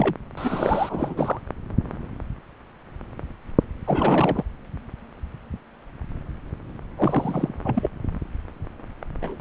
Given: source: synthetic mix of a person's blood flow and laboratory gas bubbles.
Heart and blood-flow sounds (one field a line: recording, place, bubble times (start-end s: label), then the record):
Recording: Doppler ultrasound of blood flow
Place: subclavian vein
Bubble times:
0.00-0.14 s: bubbles
0.37-1.40 s: bubbles
3.85-4.43 s: bubbles
6.96-7.54 s: bubbles
7.64-7.89 s: bubbles
9.21-9.36 s: bubbles
From the record:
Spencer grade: 3 (all of the cardiac periods contain showers or single bubble signals, but not dominating or overriding the cardiac motion signals)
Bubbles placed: anywhere in the cardiac cycle